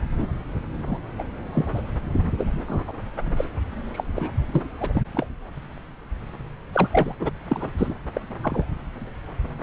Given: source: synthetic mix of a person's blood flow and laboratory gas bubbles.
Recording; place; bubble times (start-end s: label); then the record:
Doppler ultrasound of blood flow; subclavian vein
0.19-0.28 s: bubbles
0.87-0.98 s: bubbles
1.18-1.23 s: bubbles
1.54-1.70 s: bubbles
1.74-1.82 s: bubbles
2.38-2.63 s: bubbles
2.67-2.82 s: bubbles
2.88-2.93 s: bubbles
3.36-3.44 s: bubbles
3.93-4.04 s: bubbles
4.07-4.30 s: bubbles
4.52-4.65 s: bubbles
4.78-5.01 s: bubbles
5.15-5.26 s: bubbles
6.73-7.16 s: bubbles
7.20-7.30 s: bubbles
7.48-7.70 s: bubbles
7.78-7.95 s: bubbles
8.14-8.21 s: bubbles
8.42-8.65 s: bubbles
From the record:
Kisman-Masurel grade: 232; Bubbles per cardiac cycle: several, 3 to 8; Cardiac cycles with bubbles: 50 to 99%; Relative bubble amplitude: moderate (0.250 to 0.450); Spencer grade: 3 (all of the cardiac periods contain showers or single bubble signals, but not dominating or overriding the cardiac motion signals); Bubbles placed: anywhere in the cardiac cycle